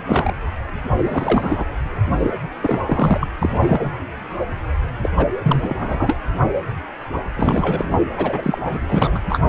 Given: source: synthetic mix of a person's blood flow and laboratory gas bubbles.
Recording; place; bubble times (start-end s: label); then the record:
Doppler ultrasound of blood flow; precordium
0.07-0.33 s: bubbles
1.04-1.65 s: bubbles
2.04-2.34 s: bubbles
2.60-3.28 s: bubbles
3.42-3.50 s: bubbles
3.52-3.91 s: bubbles
5.02-5.12 s: bubbles
5.17-5.26 s: bubbles
5.43-6.18 s: bubbles
7.37-7.95 s: bubbles
8.17-8.59 s: bubbles
8.65-8.79 s: bubbles
8.88-9.21 s: bubbles
9.29-9.41 s: bubbles
From the record:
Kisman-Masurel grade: 333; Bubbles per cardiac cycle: rolling drumbeat, 9 or more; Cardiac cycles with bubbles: 50 to 99%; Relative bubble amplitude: loud (0.450 to 0.775); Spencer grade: 3 (all of the cardiac periods contain showers or single bubble signals, but not dominating or overriding the cardiac motion signals); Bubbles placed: anywhere in the cardiac cycle